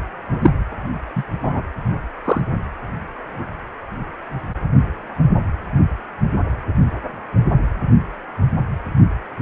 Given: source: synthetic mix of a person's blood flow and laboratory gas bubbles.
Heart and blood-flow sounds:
Doppler ultrasound of blood flow; precordium
0.41-0.50 s: bubbles
1.16-1.23 s: bubbles
1.43-1.62 s: bubbles
2.25-2.41 s: bubbles
From the record:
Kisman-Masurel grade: 123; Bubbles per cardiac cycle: 1 to 2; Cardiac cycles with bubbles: 10 to 50%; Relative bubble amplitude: loud (0.450 to 0.775); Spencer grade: 2 (many but less than half of the cardiac periods contain bubble signals, singularly or in groups); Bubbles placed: anywhere in the cardiac cycle

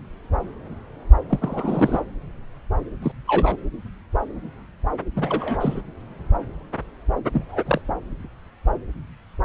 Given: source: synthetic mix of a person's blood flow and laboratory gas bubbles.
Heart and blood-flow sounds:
Doppler ultrasound of blood flow; subclavian vein
1.29-2.01 s: bubbles
3.02-3.12 s: bubbles
3.27-3.56 s: bubbles
5.16-5.82 s: bubbles
7.33-7.44 s: bubbles
7.48-7.81 s: bubbles
From the record:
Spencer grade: 2 (many but less than half of the cardiac periods contain bubble signals, singularly or in groups); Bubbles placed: anywhere in the cardiac cycle

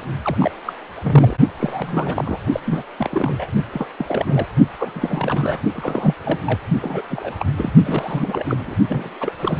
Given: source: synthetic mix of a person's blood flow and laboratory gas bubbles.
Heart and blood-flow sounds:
Doppler ultrasound of blood flow; precordium
0.00-0.03 s: bubbles
0.23-0.51 s: bubbles
0.65-0.73 s: bubbles
1.03-1.35 s: bubbles
1.58-2.40 s: bubbles
2.52-2.60 s: bubbles
2.66-2.84 s: bubbles
2.98-3.47 s: bubbles
3.72-3.86 s: bubbles
3.98-4.47 s: bubbles
4.76-5.60 s: bubbles
5.75-6.14 s: bubbles
6.23-6.39 s: bubbles
6.46-6.59 s: bubbles
6.81-7.01 s: bubbles
7.10-7.34 s: bubbles
7.39-7.46 s: bubbles
7.56-7.73 s: bubbles
7.84-8.75 s: bubbles
8.88-9.13 s: bubbles
9.20-9.33 s: bubbles
9.40-9.59 s: bubbles
From the record:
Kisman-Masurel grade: 342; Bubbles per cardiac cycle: rolling drumbeat, 9 or more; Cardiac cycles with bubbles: 100%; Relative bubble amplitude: moderate (0.250 to 0.450); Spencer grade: 3 (all of the cardiac periods contain showers or single bubble signals, but not dominating or overriding the cardiac motion signals); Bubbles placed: only in the low amplitude regions of the cardiac cycle

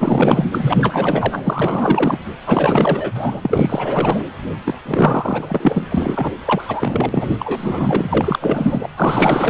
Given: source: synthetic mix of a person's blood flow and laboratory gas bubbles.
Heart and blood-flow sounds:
Doppler ultrasound of blood flow; precordium
0.00-0.44 s: bubbles
0.52-2.19 s: bubbles
2.46-3.40 s: bubbles
3.42-4.23 s: bubbles
4.65-4.79 s: bubbles
4.85-5.86 s: bubbles
5.91-6.32 s: bubbles
6.45-7.36 s: bubbles
7.39-8.89 s: bubbles
8.96-9.50 s: bubbles
From the record:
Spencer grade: 4 (maximum detectable bubble signal sounding continuously throughout systole and diastole of every cardiac period, and overriding the amplitude of the normal cardiac signals); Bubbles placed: anywhere in the cardiac cycle

